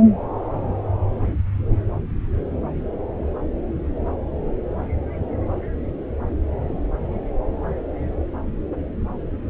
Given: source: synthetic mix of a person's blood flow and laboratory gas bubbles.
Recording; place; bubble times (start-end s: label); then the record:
Doppler ultrasound of blood flow; subclavian vein
no bubbles
From the record:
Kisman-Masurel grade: 000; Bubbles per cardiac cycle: 0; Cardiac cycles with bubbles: 0%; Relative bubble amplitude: no bubbles discernible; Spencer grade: 0 (complete lack of bubble signals)